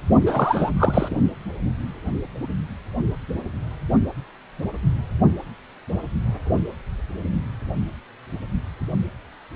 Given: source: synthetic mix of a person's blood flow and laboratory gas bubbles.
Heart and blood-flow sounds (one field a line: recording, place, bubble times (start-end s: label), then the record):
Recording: Doppler ultrasound of blood flow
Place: precordium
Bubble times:
0.26-0.70 s: bubbles
0.76-1.17 s: bubbles
From the record:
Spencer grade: 1 (occasional bubble signal discernible with the cardiac motion signal, with majority of cardiac periods free of bubbles)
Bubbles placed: only in the low amplitude regions of the cardiac cycle